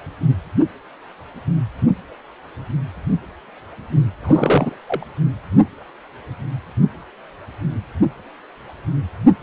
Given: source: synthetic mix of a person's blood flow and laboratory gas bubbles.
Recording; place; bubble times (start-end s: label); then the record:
Doppler ultrasound of blood flow; precordium
4.22-4.75 s: bubbles
4.88-5.06 s: bubbles
From the record:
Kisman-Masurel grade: 212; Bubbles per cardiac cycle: several, 3 to 8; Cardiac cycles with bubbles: 1 to 10%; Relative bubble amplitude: moderate (0.250 to 0.450); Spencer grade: 1 (occasional bubble signal discernible with the cardiac motion signal, with majority of cardiac periods free of bubbles); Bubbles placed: anywhere in the cardiac cycle